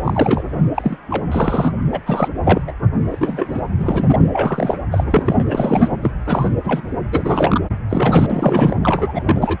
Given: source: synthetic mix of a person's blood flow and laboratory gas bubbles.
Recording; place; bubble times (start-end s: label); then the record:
Doppler ultrasound of blood flow; precordium
0.04-0.61 s: bubbles
0.74-0.97 s: bubbles
1.10-1.24 s: bubbles
1.31-1.74 s: bubbles
1.92-2.00 s: bubbles
2.06-2.29 s: bubbles
2.44-2.62 s: bubbles
2.67-2.72 s: bubbles
3.11-3.62 s: bubbles
3.78-4.29 s: bubbles
4.32-4.78 s: bubbles
4.92-5.04 s: bubbles
5.10-5.43 s: bubbles
5.49-5.92 s: bubbles
6.03-6.11 s: bubbles
6.25-6.49 s: bubbles
6.63-6.81 s: bubbles
7.11-7.61 s: bubbles
7.90-8.77 s: bubbles
8.83-9.58 s: bubbles
From the record:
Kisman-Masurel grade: 243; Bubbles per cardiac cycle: several, 3 to 8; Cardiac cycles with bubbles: 100%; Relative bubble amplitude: loud (0.450 to 0.775); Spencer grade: 3 (all of the cardiac periods contain showers or single bubble signals, but not dominating or overriding the cardiac motion signals); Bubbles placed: anywhere in the cardiac cycle